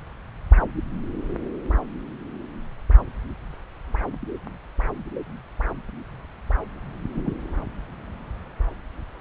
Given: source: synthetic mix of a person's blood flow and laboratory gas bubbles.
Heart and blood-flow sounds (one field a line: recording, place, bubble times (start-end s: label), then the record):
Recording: Doppler ultrasound of blood flow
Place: subclavian vein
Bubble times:
7.15-7.31 s: bubbles
From the record:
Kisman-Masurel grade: 111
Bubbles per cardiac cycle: 1 to 2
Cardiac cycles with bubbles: 1 to 10%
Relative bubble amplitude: barely perceptible (0.100 to 0.250)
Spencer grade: 1 (occasional bubble signal discernible with the cardiac motion signal, with majority of cardiac periods free of bubbles)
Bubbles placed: anywhere in the cardiac cycle